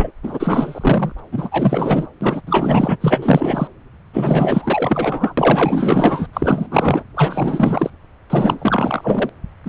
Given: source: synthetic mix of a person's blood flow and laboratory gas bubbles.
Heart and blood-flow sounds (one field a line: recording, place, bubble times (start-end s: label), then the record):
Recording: Doppler ultrasound of blood flow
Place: subclavian vein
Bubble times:
0.00-0.11 s: bubbles
0.23-1.12 s: bubbles
1.18-1.21 s: bubbles
1.32-2.07 s: bubbles
2.21-2.41 s: bubbles
2.46-2.97 s: bubbles
3.00-3.67 s: bubbles
4.13-5.34 s: bubbles
5.37-6.26 s: bubbles
6.33-6.68 s: bubbles
6.71-7.03 s: bubbles
7.16-7.90 s: bubbles
8.29-9.29 s: bubbles
9.65-9.69 s: bubbles
From the record:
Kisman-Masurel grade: 444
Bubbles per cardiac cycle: continuous sound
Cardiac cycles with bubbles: 100%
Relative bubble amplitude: maximal (0.775 to 0.999)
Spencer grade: 4 (maximum detectable bubble signal sounding continuously throughout systole and diastole of every cardiac period, and overriding the amplitude of the normal cardiac signals)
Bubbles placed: anywhere in the cardiac cycle